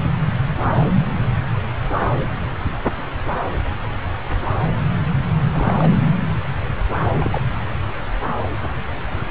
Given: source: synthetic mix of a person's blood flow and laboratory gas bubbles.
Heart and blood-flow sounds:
Doppler ultrasound of blood flow; subclavian vein
5.54-5.74 s: bubbles
5.79-5.91 s: bubbles
7.17-7.42 s: bubbles
From the record:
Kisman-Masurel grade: 221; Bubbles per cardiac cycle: several, 3 to 8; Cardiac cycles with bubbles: 10 to 50%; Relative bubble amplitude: barely perceptible (0.100 to 0.250); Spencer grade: 2 (many but less than half of the cardiac periods contain bubble signals, singularly or in groups); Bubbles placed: anywhere in the cardiac cycle

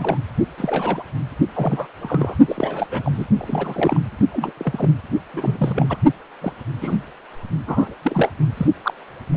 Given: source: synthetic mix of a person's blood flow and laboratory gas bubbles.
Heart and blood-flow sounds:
Doppler ultrasound of blood flow; precordium
0.00-0.17 s: bubbles
0.57-1.02 s: bubbles
1.55-1.87 s: bubbles
2.01-2.35 s: bubbles
2.48-2.87 s: bubbles
2.91-3.25 s: bubbles
3.38-4.00 s: bubbles
4.31-4.51 s: bubbles
4.57-4.90 s: bubbles
5.33-5.97 s: bubbles
6.40-6.53 s: bubbles
6.81-6.97 s: bubbles
7.66-7.95 s: bubbles
8.02-8.29 s: bubbles
8.57-8.67 s: bubbles
8.84-8.94 s: bubbles
9.33-9.37 s: bubbles
From the record:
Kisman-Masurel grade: 242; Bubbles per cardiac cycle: several, 3 to 8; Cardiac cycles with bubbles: 100%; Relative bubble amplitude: moderate (0.250 to 0.450); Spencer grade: 3 (all of the cardiac periods contain showers or single bubble signals, but not dominating or overriding the cardiac motion signals); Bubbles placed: only in the low amplitude regions of the cardiac cycle

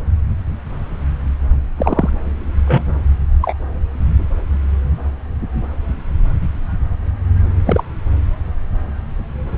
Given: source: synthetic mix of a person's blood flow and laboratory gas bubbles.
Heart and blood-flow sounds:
Doppler ultrasound of blood flow; subclavian vein
1.76-2.10 s: bubbles
2.66-3.04 s: bubbles
3.42-3.55 s: bubbles
7.66-7.83 s: bubbles
From the record:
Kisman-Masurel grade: 123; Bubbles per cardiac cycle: 1 to 2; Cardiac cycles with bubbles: 10 to 50%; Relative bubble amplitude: loud (0.450 to 0.775); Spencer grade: 2 (many but less than half of the cardiac periods contain bubble signals, singularly or in groups); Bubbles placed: anywhere in the cardiac cycle

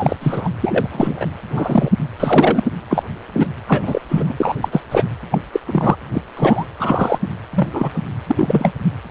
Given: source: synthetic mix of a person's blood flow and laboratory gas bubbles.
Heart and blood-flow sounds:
Doppler ultrasound of blood flow; precordium
0.00-0.16 s: bubbles
0.20-0.50 s: bubbles
0.60-1.26 s: bubbles
1.50-1.92 s: bubbles
2.19-2.64 s: bubbles
2.90-3.03 s: bubbles
3.33-3.47 s: bubbles
3.66-4.01 s: bubbles
4.08-4.33 s: bubbles
4.36-4.55 s: bubbles
4.61-4.68 s: bubbles
4.71-4.81 s: bubbles
4.91-5.04 s: bubbles
5.30-5.38 s: bubbles
5.52-5.60 s: bubbles
5.66-5.96 s: bubbles
6.13-6.21 s: bubbles
6.36-6.65 s: bubbles
6.79-7.18 s: bubbles
7.54-7.68 s: bubbles
7.73-8.01 s: bubbles
8.27-8.72 s: bubbles
From the record:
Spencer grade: 3 (all of the cardiac periods contain showers or single bubble signals, but not dominating or overriding the cardiac motion signals); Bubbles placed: anywhere in the cardiac cycle

